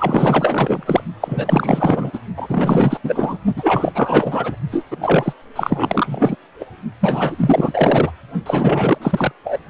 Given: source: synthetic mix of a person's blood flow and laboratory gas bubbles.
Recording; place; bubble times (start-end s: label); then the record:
Doppler ultrasound of blood flow; precordium
0.00-0.83 s: bubbles
0.85-1.02 s: bubbles
1.21-2.19 s: bubbles
2.36-3.00 s: bubbles
3.04-3.38 s: bubbles
3.56-4.55 s: bubbles
4.71-4.87 s: bubbles
4.91-4.97 s: bubbles
5.01-5.33 s: bubbles
5.55-6.36 s: bubbles
6.60-6.64 s: bubbles
7.00-8.12 s: bubbles
8.46-8.97 s: bubbles
9.02-9.32 s: bubbles
9.45-9.60 s: bubbles
From the record:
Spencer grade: 4 (maximum detectable bubble signal sounding continuously throughout systole and diastole of every cardiac period, and overriding the amplitude of the normal cardiac signals); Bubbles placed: only in the low amplitude regions of the cardiac cycle